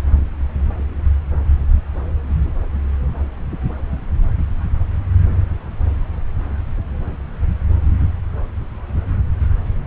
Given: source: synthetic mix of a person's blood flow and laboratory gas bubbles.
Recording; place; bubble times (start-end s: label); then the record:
Doppler ultrasound of blood flow; subclavian vein
no bubbles
From the record:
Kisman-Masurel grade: 000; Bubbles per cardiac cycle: 0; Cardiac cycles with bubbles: 0%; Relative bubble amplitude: no bubbles discernible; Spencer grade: 0 (complete lack of bubble signals)